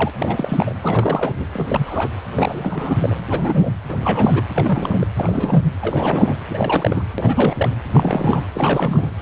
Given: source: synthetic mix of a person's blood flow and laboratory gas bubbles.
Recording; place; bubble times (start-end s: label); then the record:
Doppler ultrasound of blood flow; precordium
0.00-0.10 s: bubbles
0.20-0.74 s: bubbles
0.82-1.34 s: bubbles
1.39-1.46 s: bubbles
1.53-2.10 s: bubbles
2.34-3.21 s: bubbles
3.27-3.72 s: bubbles
3.89-4.43 s: bubbles
4.54-5.07 s: bubbles
5.16-5.62 s: bubbles
5.81-6.35 s: bubbles
6.50-7.07 s: bubbles
7.18-7.77 s: bubbles
7.94-8.46 s: bubbles
8.54-9.11 s: bubbles
From the record:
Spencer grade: 3 (all of the cardiac periods contain showers or single bubble signals, but not dominating or overriding the cardiac motion signals); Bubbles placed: anywhere in the cardiac cycle